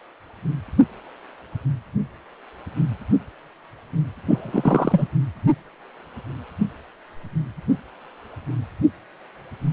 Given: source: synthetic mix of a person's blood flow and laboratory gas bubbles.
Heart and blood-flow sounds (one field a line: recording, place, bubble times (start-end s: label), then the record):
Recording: Doppler ultrasound of blood flow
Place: precordium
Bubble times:
4.27-5.08 s: bubbles
From the record:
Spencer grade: 1 (occasional bubble signal discernible with the cardiac motion signal, with majority of cardiac periods free of bubbles)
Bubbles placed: anywhere in the cardiac cycle